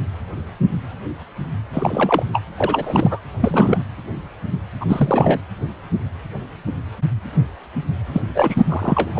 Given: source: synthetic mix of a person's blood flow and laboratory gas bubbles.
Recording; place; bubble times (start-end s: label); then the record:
Doppler ultrasound of blood flow; precordium
1.73-2.25 s: bubbles
2.33-2.42 s: bubbles
2.57-3.19 s: bubbles
3.40-3.79 s: bubbles
4.80-5.42 s: bubbles
8.13-8.22 s: bubbles
8.34-8.63 s: bubbles
8.69-9.20 s: bubbles
From the record:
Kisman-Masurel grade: 333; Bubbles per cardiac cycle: rolling drumbeat, 9 or more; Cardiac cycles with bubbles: 50 to 99%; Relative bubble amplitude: loud (0.450 to 0.775); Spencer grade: 3 (all of the cardiac periods contain showers or single bubble signals, but not dominating or overriding the cardiac motion signals); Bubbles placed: anywhere in the cardiac cycle